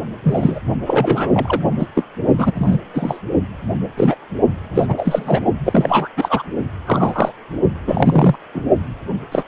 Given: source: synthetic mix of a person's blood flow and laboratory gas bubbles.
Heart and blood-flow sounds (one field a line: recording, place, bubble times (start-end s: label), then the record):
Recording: Doppler ultrasound of blood flow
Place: precordium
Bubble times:
0.23-0.59 s: bubbles
0.86-1.31 s: bubbles
1.33-1.60 s: bubbles
1.79-1.87 s: bubbles
1.95-2.04 s: bubbles
2.38-2.52 s: bubbles
2.55-2.79 s: bubbles
2.94-3.21 s: bubbles
3.96-4.15 s: bubbles
4.75-5.40 s: bubbles
5.65-6.08 s: bubbles
6.17-6.42 s: bubbles
6.85-7.31 s: bubbles
7.87-8.36 s: bubbles
8.54-8.64 s: bubbles
9.31-9.44 s: bubbles
From the record:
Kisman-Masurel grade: 243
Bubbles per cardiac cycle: several, 3 to 8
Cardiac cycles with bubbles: 100%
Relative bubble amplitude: loud (0.450 to 0.775)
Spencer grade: 3 (all of the cardiac periods contain showers or single bubble signals, but not dominating or overriding the cardiac motion signals)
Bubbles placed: only in the low amplitude regions of the cardiac cycle